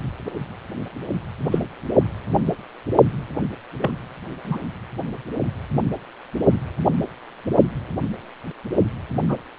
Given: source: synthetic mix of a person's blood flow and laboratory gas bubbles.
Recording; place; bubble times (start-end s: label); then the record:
Doppler ultrasound of blood flow; precordium
1.51-1.58 s: bubbles
3.81-3.90 s: bubbles
4.44-4.58 s: bubbles
9.27-9.36 s: bubbles
From the record:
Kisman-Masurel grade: 122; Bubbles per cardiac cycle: 1 to 2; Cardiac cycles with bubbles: 10 to 50%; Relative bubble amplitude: moderate (0.250 to 0.450); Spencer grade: 2 (many but less than half of the cardiac periods contain bubble signals, singularly or in groups); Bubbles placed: only in the low amplitude regions of the cardiac cycle